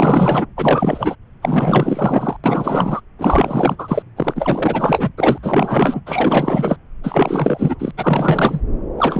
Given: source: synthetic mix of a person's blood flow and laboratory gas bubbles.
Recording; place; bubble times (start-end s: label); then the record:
Doppler ultrasound of blood flow; subclavian vein
0.00-0.46 s: bubbles
0.56-1.16 s: bubbles
1.42-2.37 s: bubbles
2.44-3.00 s: bubbles
3.19-4.03 s: bubbles
4.16-5.10 s: bubbles
5.18-5.38 s: bubbles
5.43-6.01 s: bubbles
6.06-6.77 s: bubbles
7.03-7.75 s: bubbles
7.79-7.91 s: bubbles
7.97-8.61 s: bubbles
8.97-9.20 s: bubbles
From the record:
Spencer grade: 4 (maximum detectable bubble signal sounding continuously throughout systole and diastole of every cardiac period, and overriding the amplitude of the normal cardiac signals); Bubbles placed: anywhere in the cardiac cycle